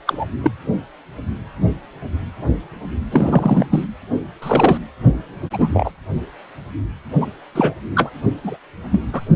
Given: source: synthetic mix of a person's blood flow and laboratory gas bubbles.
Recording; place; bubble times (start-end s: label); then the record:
Doppler ultrasound of blood flow; precordium
0.07-0.25 s: bubbles
0.44-0.52 s: bubbles
3.11-3.85 s: bubbles
4.42-4.78 s: bubbles
5.52-5.69 s: bubbles
5.73-5.92 s: bubbles
7.20-7.26 s: bubbles
7.54-7.74 s: bubbles
7.95-8.10 s: bubbles
8.43-8.57 s: bubbles
8.92-9.01 s: bubbles
9.12-9.21 s: bubbles
From the record:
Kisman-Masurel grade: 233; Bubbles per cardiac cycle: several, 3 to 8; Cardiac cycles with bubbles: 50 to 99%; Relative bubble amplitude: loud (0.450 to 0.775); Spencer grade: 3 (all of the cardiac periods contain showers or single bubble signals, but not dominating or overriding the cardiac motion signals); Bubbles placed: only in the low amplitude regions of the cardiac cycle